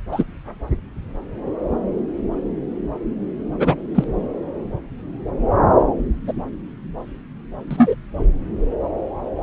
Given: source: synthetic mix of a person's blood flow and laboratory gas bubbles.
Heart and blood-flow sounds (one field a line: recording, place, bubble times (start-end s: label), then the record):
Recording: Doppler ultrasound of blood flow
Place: subclavian vein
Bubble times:
0.12-0.24 s: bubbles
3.60-3.75 s: bubbles
3.94-4.04 s: bubbles
6.27-6.33 s: bubbles
7.71-7.95 s: bubbles
From the record:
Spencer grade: 2 (many but less than half of the cardiac periods contain bubble signals, singularly or in groups)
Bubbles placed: anywhere in the cardiac cycle